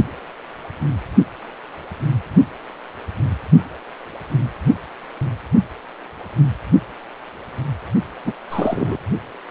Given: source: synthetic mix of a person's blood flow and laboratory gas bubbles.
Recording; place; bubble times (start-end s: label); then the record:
Doppler ultrasound of blood flow; precordium
8.24-8.32 s: bubbles
8.50-8.97 s: bubbles
From the record:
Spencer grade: 1 (occasional bubble signal discernible with the cardiac motion signal, with majority of cardiac periods free of bubbles); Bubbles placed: only in the low amplitude regions of the cardiac cycle